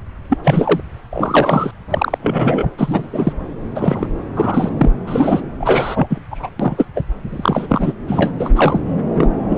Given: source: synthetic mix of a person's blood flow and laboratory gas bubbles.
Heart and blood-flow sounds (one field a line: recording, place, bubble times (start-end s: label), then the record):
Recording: Doppler ultrasound of blood flow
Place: subclavian vein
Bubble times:
0.29-0.38 s: bubbles
0.43-0.80 s: bubbles
1.12-1.71 s: bubbles
1.90-2.18 s: bubbles
2.21-2.71 s: bubbles
2.77-3.08 s: bubbles
3.12-3.32 s: bubbles
3.75-4.08 s: bubbles
4.36-4.69 s: bubbles
4.81-4.91 s: bubbles
5.07-5.41 s: bubbles
5.60-6.07 s: bubbles
6.10-6.19 s: bubbles
6.31-6.49 s: bubbles
6.60-6.87 s: bubbles
6.95-7.05 s: bubbles
7.29-7.94 s: bubbles
8.07-8.32 s: bubbles
8.39-8.49 s: bubbles
8.55-8.83 s: bubbles
9.14-9.29 s: bubbles
9.49-9.58 s: bubbles
From the record:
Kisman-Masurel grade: 243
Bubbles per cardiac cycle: several, 3 to 8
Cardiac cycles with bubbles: 100%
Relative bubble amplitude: loud (0.450 to 0.775)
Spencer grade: 3 (all of the cardiac periods contain showers or single bubble signals, but not dominating or overriding the cardiac motion signals)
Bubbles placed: anywhere in the cardiac cycle